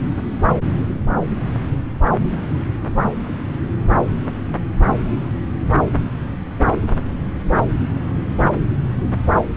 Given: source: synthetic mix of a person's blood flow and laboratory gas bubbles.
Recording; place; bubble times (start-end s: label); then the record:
Doppler ultrasound of blood flow; subclavian vein
no bubbles
From the record:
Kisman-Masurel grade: 000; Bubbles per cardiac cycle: 0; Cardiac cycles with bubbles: 0%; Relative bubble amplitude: no bubbles discernible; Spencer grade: 0 (complete lack of bubble signals)